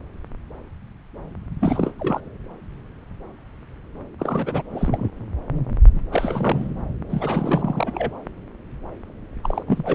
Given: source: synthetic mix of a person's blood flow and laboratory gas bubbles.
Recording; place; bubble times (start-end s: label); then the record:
Doppler ultrasound of blood flow; subclavian vein
1.60-1.93 s: bubbles
1.97-2.25 s: bubbles
4.19-4.62 s: bubbles
4.72-5.09 s: bubbles
5.95-6.01 s: bubbles
6.12-6.81 s: bubbles
7.09-8.18 s: bubbles
9.43-9.63 s: bubbles
9.67-9.95 s: bubbles
From the record:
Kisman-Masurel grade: 332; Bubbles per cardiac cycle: rolling drumbeat, 9 or more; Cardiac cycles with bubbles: 50 to 99%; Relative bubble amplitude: moderate (0.250 to 0.450); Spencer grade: 3 (all of the cardiac periods contain showers or single bubble signals, but not dominating or overriding the cardiac motion signals); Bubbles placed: anywhere in the cardiac cycle